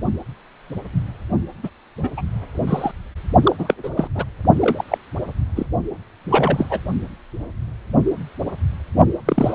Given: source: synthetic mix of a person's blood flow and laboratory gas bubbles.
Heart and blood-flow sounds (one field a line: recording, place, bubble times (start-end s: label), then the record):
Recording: Doppler ultrasound of blood flow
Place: precordium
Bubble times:
1.63-1.70 s: bubbles
2.02-2.10 s: bubbles
2.17-2.22 s: bubbles
2.67-2.92 s: bubbles
3.43-3.56 s: bubbles
3.58-3.74 s: bubbles
3.83-3.90 s: bubbles
3.96-4.08 s: bubbles
4.15-4.24 s: bubbles
4.59-4.84 s: bubbles
4.88-4.98 s: bubbles
5.55-5.66 s: bubbles
6.29-6.66 s: bubbles
6.70-6.81 s: bubbles
9.25-9.55 s: bubbles
From the record:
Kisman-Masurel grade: 233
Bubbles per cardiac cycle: several, 3 to 8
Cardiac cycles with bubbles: 50 to 99%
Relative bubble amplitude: loud (0.450 to 0.775)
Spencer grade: 3 (all of the cardiac periods contain showers or single bubble signals, but not dominating or overriding the cardiac motion signals)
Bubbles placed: only in the low amplitude regions of the cardiac cycle